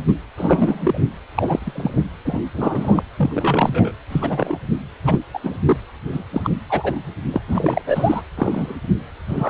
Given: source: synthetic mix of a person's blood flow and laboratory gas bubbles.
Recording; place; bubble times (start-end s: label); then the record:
Doppler ultrasound of blood flow; precordium
0.00-0.04 s: bubbles
0.07-0.15 s: bubbles
0.37-1.04 s: bubbles
1.34-2.03 s: bubbles
2.25-2.43 s: bubbles
2.54-3.03 s: bubbles
3.18-3.92 s: bubbles
4.10-4.58 s: bubbles
5.02-5.19 s: bubbles
5.33-5.40 s: bubbles
5.44-5.58 s: bubbles
5.65-5.77 s: bubbles
6.12-6.24 s: bubbles
6.32-6.50 s: bubbles
6.69-6.99 s: bubbles
7.31-7.42 s: bubbles
7.48-7.82 s: bubbles
7.86-8.22 s: bubbles
8.38-8.75 s: bubbles
9.26-9.50 s: bubbles
From the record:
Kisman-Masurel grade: 243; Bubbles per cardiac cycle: several, 3 to 8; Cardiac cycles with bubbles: 100%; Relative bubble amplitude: loud (0.450 to 0.775); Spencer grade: 3 (all of the cardiac periods contain showers or single bubble signals, but not dominating or overriding the cardiac motion signals); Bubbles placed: anywhere in the cardiac cycle